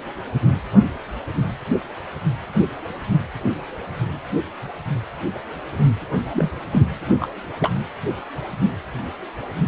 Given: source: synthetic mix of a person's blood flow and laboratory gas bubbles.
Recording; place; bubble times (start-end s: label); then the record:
Doppler ultrasound of blood flow; precordium
6.34-6.51 s: bubbles
6.72-6.85 s: bubbles
7.20-7.28 s: bubbles
7.60-7.70 s: bubbles
From the record:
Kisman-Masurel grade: 212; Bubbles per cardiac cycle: several, 3 to 8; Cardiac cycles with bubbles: 1 to 10%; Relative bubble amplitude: moderate (0.250 to 0.450); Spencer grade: 1 (occasional bubble signal discernible with the cardiac motion signal, with majority of cardiac periods free of bubbles); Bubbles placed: anywhere in the cardiac cycle